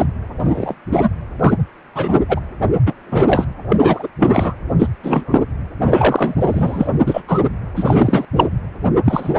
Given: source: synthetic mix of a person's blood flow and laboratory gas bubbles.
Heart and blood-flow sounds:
Doppler ultrasound of blood flow; precordium
0.00-0.06 s: bubbles
0.40-0.74 s: bubbles
0.92-1.08 s: bubbles
1.40-1.51 s: bubbles
1.94-2.17 s: bubbles
2.29-2.40 s: bubbles
2.86-2.94 s: bubbles
3.06-3.44 s: bubbles
3.69-3.77 s: bubbles
3.80-4.07 s: bubbles
4.20-4.54 s: bubbles
4.79-4.88 s: bubbles
5.03-5.40 s: bubbles
5.82-6.36 s: bubbles
6.40-6.88 s: bubbles
7.06-7.22 s: bubbles
7.28-7.38 s: bubbles
7.76-8.25 s: bubbles
8.36-8.46 s: bubbles
9.05-9.34 s: bubbles
From the record:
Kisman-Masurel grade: 243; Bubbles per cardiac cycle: several, 3 to 8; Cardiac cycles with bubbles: 100%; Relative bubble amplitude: loud (0.450 to 0.775); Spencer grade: 3 (all of the cardiac periods contain showers or single bubble signals, but not dominating or overriding the cardiac motion signals); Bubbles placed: anywhere in the cardiac cycle

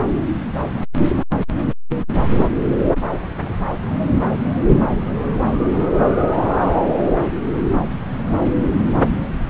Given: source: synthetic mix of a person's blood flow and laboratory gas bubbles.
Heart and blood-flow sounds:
Doppler ultrasound of blood flow; subclavian vein
2.93-3.26 s: bubbles
3.37-3.53 s: bubbles
From the record:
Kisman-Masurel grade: 211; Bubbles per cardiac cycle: several, 3 to 8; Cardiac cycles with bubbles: 1 to 10%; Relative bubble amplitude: barely perceptible (0.100 to 0.250); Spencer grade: 1 (occasional bubble signal discernible with the cardiac motion signal, with majority of cardiac periods free of bubbles); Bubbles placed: anywhere in the cardiac cycle

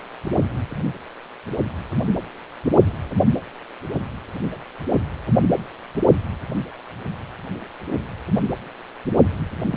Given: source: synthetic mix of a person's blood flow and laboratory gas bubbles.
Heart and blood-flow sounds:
Doppler ultrasound of blood flow; precordium
9.70-9.76 s: bubbles
From the record:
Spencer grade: 1 (occasional bubble signal discernible with the cardiac motion signal, with majority of cardiac periods free of bubbles); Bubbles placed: anywhere in the cardiac cycle

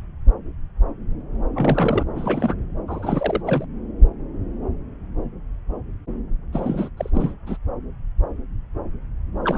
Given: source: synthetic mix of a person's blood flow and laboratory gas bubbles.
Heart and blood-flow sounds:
Doppler ultrasound of blood flow; subclavian vein
1.54-2.04 s: bubbles
2.09-2.54 s: bubbles
2.88-3.42 s: bubbles
3.44-3.65 s: bubbles
6.53-6.89 s: bubbles
6.97-7.10 s: bubbles
7.14-7.32 s: bubbles
7.46-7.57 s: bubbles
9.43-9.58 s: bubbles
From the record:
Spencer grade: 2 (many but less than half of the cardiac periods contain bubble signals, singularly or in groups); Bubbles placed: anywhere in the cardiac cycle

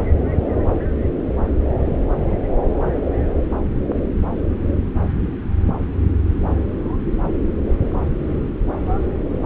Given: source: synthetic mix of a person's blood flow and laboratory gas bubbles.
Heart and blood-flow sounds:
Doppler ultrasound of blood flow; subclavian vein
no bubbles
From the record:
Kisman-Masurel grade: 000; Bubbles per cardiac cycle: 0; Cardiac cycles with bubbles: 0%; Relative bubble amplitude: no bubbles discernible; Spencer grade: 0 (complete lack of bubble signals)

